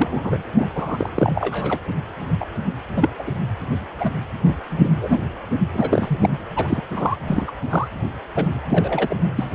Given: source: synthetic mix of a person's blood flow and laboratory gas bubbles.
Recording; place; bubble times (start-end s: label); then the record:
Doppler ultrasound of blood flow; precordium
0.00-0.38 s: bubbles
0.54-0.69 s: bubbles
0.75-1.09 s: bubbles
1.15-1.79 s: bubbles
2.40-2.45 s: bubbles
2.96-3.10 s: bubbles
3.19-3.23 s: bubbles
3.27-3.31 s: bubbles
4.00-4.10 s: bubbles
4.46-4.56 s: bubbles
4.70-5.19 s: bubbles
5.73-6.29 s: bubbles
6.55-6.80 s: bubbles
6.96-7.16 s: bubbles
7.26-7.51 s: bubbles
7.69-7.88 s: bubbles
8.36-8.48 s: bubbles
8.69-9.16 s: bubbles
9.37-9.49 s: bubbles
From the record:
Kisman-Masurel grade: 242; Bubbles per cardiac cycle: several, 3 to 8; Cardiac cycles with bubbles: 100%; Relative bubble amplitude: moderate (0.250 to 0.450); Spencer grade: 3 (all of the cardiac periods contain showers or single bubble signals, but not dominating or overriding the cardiac motion signals); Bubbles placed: anywhere in the cardiac cycle